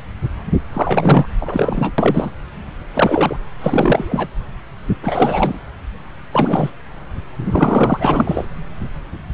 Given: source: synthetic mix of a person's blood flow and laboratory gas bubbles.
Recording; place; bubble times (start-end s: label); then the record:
Doppler ultrasound of blood flow; subclavian vein
0.73-1.26 s: bubbles
1.41-1.92 s: bubbles
1.98-2.31 s: bubbles
2.94-3.38 s: bubbles
3.60-4.28 s: bubbles
5.02-5.59 s: bubbles
6.32-6.73 s: bubbles
7.51-8.45 s: bubbles
From the record:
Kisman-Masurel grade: 333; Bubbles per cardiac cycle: rolling drumbeat, 9 or more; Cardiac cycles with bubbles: 50 to 99%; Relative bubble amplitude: loud (0.450 to 0.775); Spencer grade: 3 (all of the cardiac periods contain showers or single bubble signals, but not dominating or overriding the cardiac motion signals); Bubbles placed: anywhere in the cardiac cycle